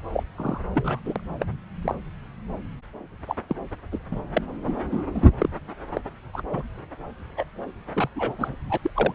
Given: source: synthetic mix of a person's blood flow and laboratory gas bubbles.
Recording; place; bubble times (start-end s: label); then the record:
Doppler ultrasound of blood flow; subclavian vein
0.12-0.23 s: bubbles
0.36-0.61 s: bubbles
0.73-0.99 s: bubbles
1.04-1.20 s: bubbles
1.40-1.46 s: bubbles
1.81-1.95 s: bubbles
3.27-3.35 s: bubbles
3.49-3.56 s: bubbles
3.92-3.98 s: bubbles
4.11-4.21 s: bubbles
4.35-4.42 s: bubbles
4.64-4.76 s: bubbles
4.92-5.04 s: bubbles
5.14-5.29 s: bubbles
5.38-5.50 s: bubbles
5.94-6.01 s: bubbles
6.33-6.42 s: bubbles
6.50-6.67 s: bubbles
7.36-7.44 s: bubbles
7.93-8.09 s: bubbles
8.15-8.35 s: bubbles
8.38-8.55 s: bubbles
8.70-8.78 s: bubbles
8.82-8.91 s: bubbles
8.95-9.13 s: bubbles
From the record:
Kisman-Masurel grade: 242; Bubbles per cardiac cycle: several, 3 to 8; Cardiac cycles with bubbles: 100%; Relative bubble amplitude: moderate (0.250 to 0.450); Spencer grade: 3 (all of the cardiac periods contain showers or single bubble signals, but not dominating or overriding the cardiac motion signals); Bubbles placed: anywhere in the cardiac cycle